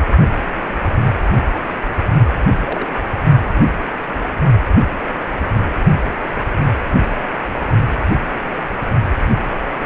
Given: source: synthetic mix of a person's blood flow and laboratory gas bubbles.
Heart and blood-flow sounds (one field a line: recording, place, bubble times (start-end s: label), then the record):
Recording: Doppler ultrasound of blood flow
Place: precordium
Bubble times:
2.60-2.88 s: bubbles
From the record:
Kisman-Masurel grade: 111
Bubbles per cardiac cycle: 1 to 2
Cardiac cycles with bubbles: 1 to 10%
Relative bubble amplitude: barely perceptible (0.100 to 0.250)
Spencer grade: 1 (occasional bubble signal discernible with the cardiac motion signal, with majority of cardiac periods free of bubbles)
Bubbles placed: only in the low amplitude regions of the cardiac cycle